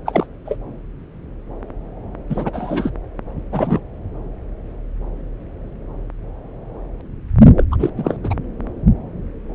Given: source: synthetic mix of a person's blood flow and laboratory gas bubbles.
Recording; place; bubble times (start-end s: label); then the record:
Doppler ultrasound of blood flow; subclavian vein
0.05-0.27 s: bubbles
0.46-0.56 s: bubbles
2.29-2.90 s: bubbles
3.51-3.80 s: bubbles
7.57-7.64 s: bubbles
7.71-7.76 s: bubbles
7.79-7.90 s: bubbles
7.96-8.17 s: bubbles
8.23-8.35 s: bubbles
From the record:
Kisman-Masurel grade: 222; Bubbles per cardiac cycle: several, 3 to 8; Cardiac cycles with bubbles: 10 to 50%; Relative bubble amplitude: moderate (0.250 to 0.450); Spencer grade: 2 (many but less than half of the cardiac periods contain bubble signals, singularly or in groups); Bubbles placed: anywhere in the cardiac cycle